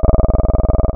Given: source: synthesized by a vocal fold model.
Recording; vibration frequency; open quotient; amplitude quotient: sustained vowel; 20 Hz; 0.3; 1.1